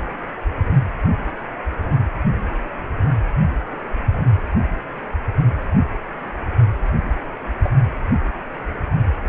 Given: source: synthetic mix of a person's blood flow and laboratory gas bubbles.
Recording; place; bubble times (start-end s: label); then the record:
Doppler ultrasound of blood flow; precordium
4.12-4.29 s: bubbles
7.63-7.77 s: bubbles
From the record:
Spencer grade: 2 (many but less than half of the cardiac periods contain bubble signals, singularly or in groups); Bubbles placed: anywhere in the cardiac cycle